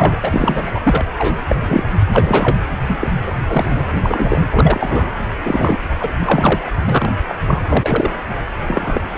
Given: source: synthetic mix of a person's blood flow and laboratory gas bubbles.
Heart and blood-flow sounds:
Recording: Doppler ultrasound of blood flow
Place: precordium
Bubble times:
0.00-0.20 s: bubbles
0.22-0.62 s: bubbles
0.71-0.79 s: bubbles
0.86-1.05 s: bubbles
1.18-1.36 s: bubbles
1.49-1.56 s: bubbles
1.61-1.84 s: bubbles
2.12-2.57 s: bubbles
2.88-3.08 s: bubbles
3.25-3.32 s: bubbles
3.34-3.85 s: bubbles
3.92-4.41 s: bubbles
4.50-5.11 s: bubbles
5.44-5.78 s: bubbles
6.00-6.12 s: bubbles
6.18-6.72 s: bubbles
6.85-7.13 s: bubbles
7.28-7.35 s: bubbles
7.46-7.62 s: bubbles
7.70-8.11 s: bubbles
8.66-9.00 s: bubbles
9.13-9.18 s: bubbles
From the record:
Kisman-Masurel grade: 243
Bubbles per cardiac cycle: several, 3 to 8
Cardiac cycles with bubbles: 100%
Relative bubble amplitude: loud (0.450 to 0.775)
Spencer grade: 3 (all of the cardiac periods contain showers or single bubble signals, but not dominating or overriding the cardiac motion signals)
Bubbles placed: anywhere in the cardiac cycle

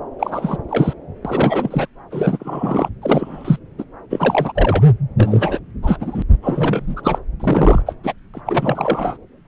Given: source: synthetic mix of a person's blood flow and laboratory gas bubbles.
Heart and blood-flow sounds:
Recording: Doppler ultrasound of blood flow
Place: subclavian vein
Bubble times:
0.19-0.57 s: bubbles
0.69-0.94 s: bubbles
1.25-1.87 s: bubbles
2.11-2.89 s: bubbles
3.01-3.58 s: bubbles
3.78-3.83 s: bubbles
4.10-4.52 s: bubbles
4.55-4.83 s: bubbles
5.17-5.59 s: bubbles
5.82-5.97 s: bubbles
6.00-6.22 s: bubbles
6.42-7.18 s: bubbles
7.39-7.82 s: bubbles
7.86-7.94 s: bubbles
8.04-8.13 s: bubbles
8.33-8.40 s: bubbles
8.46-9.18 s: bubbles
From the record:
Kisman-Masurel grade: 343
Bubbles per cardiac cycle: rolling drumbeat, 9 or more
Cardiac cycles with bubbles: 100%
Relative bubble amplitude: loud (0.450 to 0.775)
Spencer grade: 3 (all of the cardiac periods contain showers or single bubble signals, but not dominating or overriding the cardiac motion signals)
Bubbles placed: anywhere in the cardiac cycle

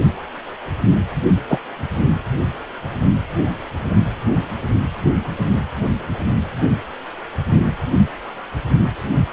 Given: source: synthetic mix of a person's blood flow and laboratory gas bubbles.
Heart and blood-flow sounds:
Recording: Doppler ultrasound of blood flow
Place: precordium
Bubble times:
1.48-1.59 s: bubbles
From the record:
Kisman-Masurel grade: 113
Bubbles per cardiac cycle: 1 to 2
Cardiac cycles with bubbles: 1 to 10%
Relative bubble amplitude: loud (0.450 to 0.775)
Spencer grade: 1 (occasional bubble signal discernible with the cardiac motion signal, with majority of cardiac periods free of bubbles)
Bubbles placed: only in the low amplitude regions of the cardiac cycle

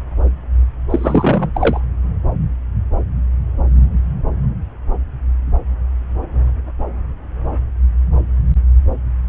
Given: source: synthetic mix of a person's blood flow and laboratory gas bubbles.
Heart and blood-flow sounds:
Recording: Doppler ultrasound of blood flow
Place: subclavian vein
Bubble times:
0.90-1.50 s: bubbles
1.54-1.81 s: bubbles
From the record:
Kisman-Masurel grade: 213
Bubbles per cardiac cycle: several, 3 to 8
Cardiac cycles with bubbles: 1 to 10%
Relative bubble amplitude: loud (0.450 to 0.775)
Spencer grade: 1 (occasional bubble signal discernible with the cardiac motion signal, with majority of cardiac periods free of bubbles)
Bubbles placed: anywhere in the cardiac cycle

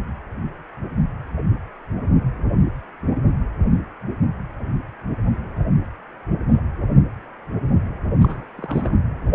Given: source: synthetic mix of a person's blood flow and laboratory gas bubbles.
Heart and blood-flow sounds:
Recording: Doppler ultrasound of blood flow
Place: precordium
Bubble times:
8.20-8.45 s: bubbles
8.57-8.96 s: bubbles
From the record:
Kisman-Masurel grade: 211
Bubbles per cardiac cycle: several, 3 to 8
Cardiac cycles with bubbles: 1 to 10%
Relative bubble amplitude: barely perceptible (0.100 to 0.250)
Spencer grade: 1 (occasional bubble signal discernible with the cardiac motion signal, with majority of cardiac periods free of bubbles)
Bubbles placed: anywhere in the cardiac cycle

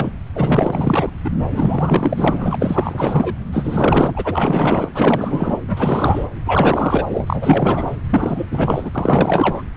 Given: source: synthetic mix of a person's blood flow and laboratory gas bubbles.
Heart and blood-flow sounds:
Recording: Doppler ultrasound of blood flow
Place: subclavian vein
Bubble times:
0.00-0.12 s: bubbles
0.35-1.09 s: bubbles
1.24-1.30 s: bubbles
1.50-2.56 s: bubbles
2.59-3.35 s: bubbles
3.53-4.89 s: bubbles
4.94-5.61 s: bubbles
5.68-6.26 s: bubbles
6.46-7.06 s: bubbles
7.09-7.95 s: bubbles
8.10-8.46 s: bubbles
8.51-8.92 s: bubbles
8.95-9.62 s: bubbles
From the record:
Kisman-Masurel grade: 444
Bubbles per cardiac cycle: continuous sound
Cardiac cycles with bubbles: 100%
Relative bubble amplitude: maximal (0.775 to 0.999)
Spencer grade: 4 (maximum detectable bubble signal sounding continuously throughout systole and diastole of every cardiac period, and overriding the amplitude of the normal cardiac signals)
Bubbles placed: anywhere in the cardiac cycle

